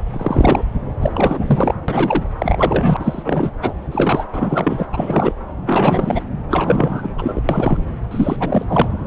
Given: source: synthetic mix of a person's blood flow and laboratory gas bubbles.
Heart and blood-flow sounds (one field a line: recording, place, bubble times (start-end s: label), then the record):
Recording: Doppler ultrasound of blood flow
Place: subclavian vein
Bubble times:
0.12-0.62 s: bubbles
1.02-1.75 s: bubbles
1.88-2.25 s: bubbles
2.40-3.51 s: bubbles
3.61-3.73 s: bubbles
3.91-4.25 s: bubbles
4.32-4.86 s: bubbles
4.93-5.32 s: bubbles
5.66-6.24 s: bubbles
6.48-7.09 s: bubbles
7.18-7.40 s: bubbles
7.49-7.83 s: bubbles
8.11-8.37 s: bubbles
8.40-8.65 s: bubbles
8.68-8.88 s: bubbles
From the record:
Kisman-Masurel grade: 343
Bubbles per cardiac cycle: rolling drumbeat, 9 or more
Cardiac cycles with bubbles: 100%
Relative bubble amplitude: loud (0.450 to 0.775)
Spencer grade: 3 (all of the cardiac periods contain showers or single bubble signals, but not dominating or overriding the cardiac motion signals)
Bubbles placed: anywhere in the cardiac cycle